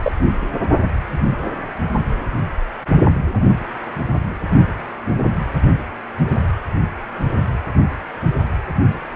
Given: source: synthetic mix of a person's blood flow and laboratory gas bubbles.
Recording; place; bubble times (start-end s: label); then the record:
Doppler ultrasound of blood flow; precordium
0.02-0.12 s: bubbles
From the record:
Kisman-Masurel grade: 112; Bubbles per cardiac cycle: 1 to 2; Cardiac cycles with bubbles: 1 to 10%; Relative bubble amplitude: moderate (0.250 to 0.450); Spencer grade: 1 (occasional bubble signal discernible with the cardiac motion signal, with majority of cardiac periods free of bubbles); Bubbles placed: anywhere in the cardiac cycle